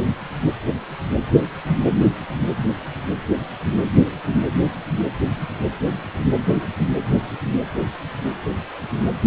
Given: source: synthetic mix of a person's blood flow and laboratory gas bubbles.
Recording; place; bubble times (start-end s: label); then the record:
Doppler ultrasound of blood flow; precordium
no bubbles
From the record:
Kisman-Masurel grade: 000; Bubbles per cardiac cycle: 0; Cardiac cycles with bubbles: 0%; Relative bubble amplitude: no bubbles discernible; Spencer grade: 0 (complete lack of bubble signals)